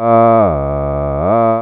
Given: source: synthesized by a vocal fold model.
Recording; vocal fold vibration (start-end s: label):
sustained vowel that changes in the middle
0.00-0.37 s: 114.4 Hz, open quotient 0.34
0.57-1.17 s: 71.2 Hz, open quotient 0.43
1.37-1.62 s: 114.4 Hz, open quotient 0.34